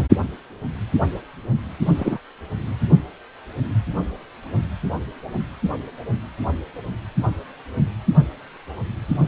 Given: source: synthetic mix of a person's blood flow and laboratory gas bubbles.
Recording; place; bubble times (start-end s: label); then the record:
Doppler ultrasound of blood flow; precordium
1.98-2.18 s: bubbles
From the record:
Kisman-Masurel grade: 113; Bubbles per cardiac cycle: 1 to 2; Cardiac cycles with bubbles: 1 to 10%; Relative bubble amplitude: loud (0.450 to 0.775); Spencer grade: 1 (occasional bubble signal discernible with the cardiac motion signal, with majority of cardiac periods free of bubbles); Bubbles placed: only in the low amplitude regions of the cardiac cycle